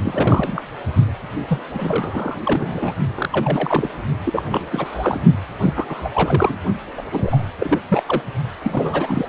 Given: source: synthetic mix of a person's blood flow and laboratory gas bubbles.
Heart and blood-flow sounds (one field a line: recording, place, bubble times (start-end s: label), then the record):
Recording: Doppler ultrasound of blood flow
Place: precordium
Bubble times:
0.03-0.61 s: bubbles
1.49-1.65 s: bubbles
1.75-2.40 s: bubbles
2.45-2.93 s: bubbles
3.15-3.29 s: bubbles
3.32-3.90 s: bubbles
4.24-4.42 s: bubbles
4.50-4.65 s: bubbles
4.71-5.19 s: bubbles
5.61-6.09 s: bubbles
6.13-6.58 s: bubbles
6.96-7.01 s: bubbles
7.12-7.43 s: bubbles
7.59-7.79 s: bubbles
7.89-8.03 s: bubbles
8.06-8.22 s: bubbles
8.63-9.27 s: bubbles
From the record:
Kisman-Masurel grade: 342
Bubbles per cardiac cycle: rolling drumbeat, 9 or more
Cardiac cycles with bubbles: 100%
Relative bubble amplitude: moderate (0.250 to 0.450)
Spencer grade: 3 (all of the cardiac periods contain showers or single bubble signals, but not dominating or overriding the cardiac motion signals)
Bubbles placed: only in the low amplitude regions of the cardiac cycle